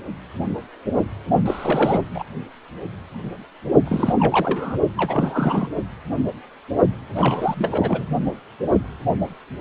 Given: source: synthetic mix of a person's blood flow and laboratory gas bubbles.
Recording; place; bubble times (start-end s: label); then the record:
Doppler ultrasound of blood flow; precordium
1.46-2.02 s: bubbles
2.15-2.24 s: bubbles
3.85-4.76 s: bubbles
4.97-5.68 s: bubbles
7.16-8.05 s: bubbles
From the record:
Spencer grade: 3 (all of the cardiac periods contain showers or single bubble signals, but not dominating or overriding the cardiac motion signals); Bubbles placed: only in the low amplitude regions of the cardiac cycle